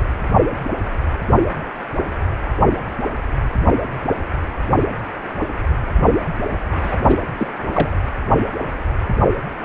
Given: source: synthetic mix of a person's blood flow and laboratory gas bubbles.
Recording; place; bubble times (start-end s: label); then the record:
Doppler ultrasound of blood flow; precordium
6.83-6.97 s: bubbles
7.08-7.20 s: bubbles
7.37-7.46 s: bubbles
7.73-7.96 s: bubbles
From the record:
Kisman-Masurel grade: 222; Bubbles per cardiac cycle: several, 3 to 8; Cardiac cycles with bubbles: 10 to 50%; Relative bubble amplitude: moderate (0.250 to 0.450); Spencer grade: 2 (many but less than half of the cardiac periods contain bubble signals, singularly or in groups); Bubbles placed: anywhere in the cardiac cycle